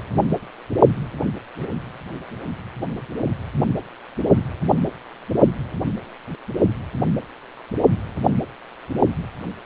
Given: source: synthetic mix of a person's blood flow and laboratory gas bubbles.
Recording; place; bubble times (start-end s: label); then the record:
Doppler ultrasound of blood flow; precordium
1.58-1.68 s: bubbles
From the record:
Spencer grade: 2 (many but less than half of the cardiac periods contain bubble signals, singularly or in groups); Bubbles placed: only in the low amplitude regions of the cardiac cycle